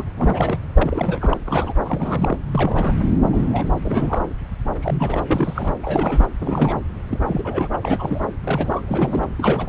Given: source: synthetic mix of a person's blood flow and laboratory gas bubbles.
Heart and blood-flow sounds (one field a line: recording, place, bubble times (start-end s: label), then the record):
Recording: Doppler ultrasound of blood flow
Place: subclavian vein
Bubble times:
0.00-0.04 s: bubbles
0.17-0.59 s: bubbles
0.74-1.38 s: bubbles
1.46-1.74 s: bubbles
1.85-2.39 s: bubbles
2.51-2.94 s: bubbles
3.33-3.78 s: bubbles
3.84-4.24 s: bubbles
4.82-5.23 s: bubbles
5.28-5.73 s: bubbles
5.83-6.26 s: bubbles
6.38-6.79 s: bubbles
7.08-7.20 s: bubbles
7.26-7.67 s: bubbles
7.72-7.78 s: bubbles
7.83-8.21 s: bubbles
8.43-8.82 s: bubbles
8.88-9.26 s: bubbles
9.36-9.67 s: bubbles
From the record:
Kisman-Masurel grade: 332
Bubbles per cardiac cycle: rolling drumbeat, 9 or more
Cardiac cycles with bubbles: 50 to 99%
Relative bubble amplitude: moderate (0.250 to 0.450)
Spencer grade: 3 (all of the cardiac periods contain showers or single bubble signals, but not dominating or overriding the cardiac motion signals)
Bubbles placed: anywhere in the cardiac cycle